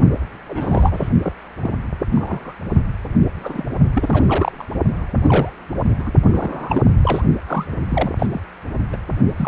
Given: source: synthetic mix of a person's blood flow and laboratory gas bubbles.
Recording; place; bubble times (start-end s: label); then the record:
Doppler ultrasound of blood flow; precordium
0.48-1.09 s: bubbles
1.22-1.32 s: bubbles
1.61-1.76 s: bubbles
2.13-2.54 s: bubbles
3.35-3.65 s: bubbles
3.94-4.67 s: bubbles
5.21-5.53 s: bubbles
5.83-5.91 s: bubbles
5.98-6.12 s: bubbles
6.27-6.83 s: bubbles
7.02-7.22 s: bubbles
7.46-7.66 s: bubbles
7.90-8.11 s: bubbles
8.19-8.27 s: bubbles
8.31-8.41 s: bubbles
8.92-8.96 s: bubbles
9.35-9.48 s: bubbles
From the record:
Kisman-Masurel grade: 242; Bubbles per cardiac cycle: several, 3 to 8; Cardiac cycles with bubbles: 100%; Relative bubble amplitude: moderate (0.250 to 0.450); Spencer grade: 3 (all of the cardiac periods contain showers or single bubble signals, but not dominating or overriding the cardiac motion signals); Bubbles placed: only in the low amplitude regions of the cardiac cycle